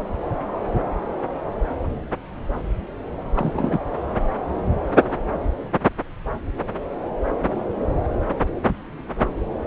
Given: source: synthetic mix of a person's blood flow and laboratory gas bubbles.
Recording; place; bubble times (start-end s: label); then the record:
Doppler ultrasound of blood flow; subclavian vein
3.35-3.79 s: bubbles
From the record:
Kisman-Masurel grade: 112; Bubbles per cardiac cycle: 1 to 2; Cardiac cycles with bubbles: 1 to 10%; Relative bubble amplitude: moderate (0.250 to 0.450); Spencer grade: 1 (occasional bubble signal discernible with the cardiac motion signal, with majority of cardiac periods free of bubbles); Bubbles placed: anywhere in the cardiac cycle